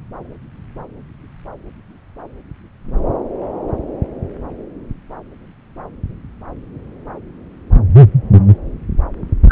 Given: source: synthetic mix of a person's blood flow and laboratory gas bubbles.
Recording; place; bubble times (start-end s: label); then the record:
Doppler ultrasound of blood flow; subclavian vein
9.48-9.52 s: bubbles
From the record:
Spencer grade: 1 (occasional bubble signal discernible with the cardiac motion signal, with majority of cardiac periods free of bubbles); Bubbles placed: anywhere in the cardiac cycle